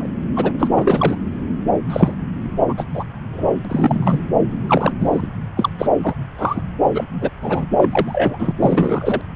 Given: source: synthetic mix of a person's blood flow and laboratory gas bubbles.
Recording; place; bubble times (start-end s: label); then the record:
Doppler ultrasound of blood flow; subclavian vein
0.00-0.08 s: bubbles
0.35-0.52 s: bubbles
0.59-0.68 s: bubbles
0.75-1.17 s: bubbles
1.90-2.15 s: bubbles
2.69-2.85 s: bubbles
2.94-3.04 s: bubbles
3.33-4.19 s: bubbles
4.67-4.92 s: bubbles
4.99-5.27 s: bubbles
5.56-5.70 s: bubbles
5.79-5.88 s: bubbles
6.02-6.14 s: bubbles
6.38-6.62 s: bubbles
6.94-7.05 s: bubbles
7.21-7.30 s: bubbles
7.41-7.66 s: bubbles
7.77-8.51 s: bubbles
8.60-9.21 s: bubbles
From the record:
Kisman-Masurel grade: 243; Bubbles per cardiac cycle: several, 3 to 8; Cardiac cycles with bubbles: 100%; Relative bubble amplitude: loud (0.450 to 0.775); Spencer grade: 3 (all of the cardiac periods contain showers or single bubble signals, but not dominating or overriding the cardiac motion signals); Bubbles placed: anywhere in the cardiac cycle